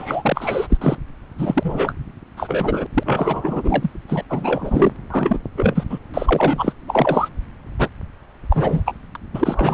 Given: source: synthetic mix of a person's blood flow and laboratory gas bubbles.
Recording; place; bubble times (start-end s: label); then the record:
Doppler ultrasound of blood flow; subclavian vein
0.00-0.67 s: bubbles
0.69-0.78 s: bubbles
0.81-0.97 s: bubbles
1.38-1.93 s: bubbles
2.37-2.86 s: bubbles
2.94-3.90 s: bubbles
4.08-4.24 s: bubbles
4.29-4.92 s: bubbles
5.10-5.38 s: bubbles
5.57-5.84 s: bubbles
5.90-5.99 s: bubbles
6.14-6.73 s: bubbles
6.87-7.29 s: bubbles
7.79-7.88 s: bubbles
8.50-8.95 s: bubbles
9.15-9.17 s: bubbles
9.34-9.74 s: bubbles
From the record:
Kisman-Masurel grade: 343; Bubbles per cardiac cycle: rolling drumbeat, 9 or more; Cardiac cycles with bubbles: 100%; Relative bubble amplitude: loud (0.450 to 0.775); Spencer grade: 3 (all of the cardiac periods contain showers or single bubble signals, but not dominating or overriding the cardiac motion signals); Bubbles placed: anywhere in the cardiac cycle